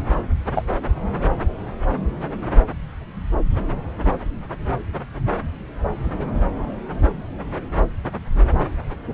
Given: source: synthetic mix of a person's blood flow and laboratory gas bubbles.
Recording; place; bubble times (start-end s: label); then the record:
Doppler ultrasound of blood flow; subclavian vein
0.55-0.62 s: bubbles
From the record:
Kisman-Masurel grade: 122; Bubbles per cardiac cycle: 1 to 2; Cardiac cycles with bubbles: 10 to 50%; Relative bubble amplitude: moderate (0.250 to 0.450); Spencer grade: 2 (many but less than half of the cardiac periods contain bubble signals, singularly or in groups); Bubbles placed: anywhere in the cardiac cycle